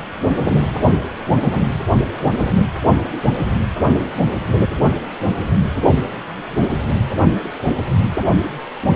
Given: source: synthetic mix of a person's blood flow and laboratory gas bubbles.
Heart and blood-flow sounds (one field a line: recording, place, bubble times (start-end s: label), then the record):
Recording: Doppler ultrasound of blood flow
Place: precordium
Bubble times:
4.14-4.28 s: bubbles
From the record:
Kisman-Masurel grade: 111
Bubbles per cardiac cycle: 1 to 2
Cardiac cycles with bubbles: 1 to 10%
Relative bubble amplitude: barely perceptible (0.100 to 0.250)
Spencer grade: 1 (occasional bubble signal discernible with the cardiac motion signal, with majority of cardiac periods free of bubbles)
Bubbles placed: anywhere in the cardiac cycle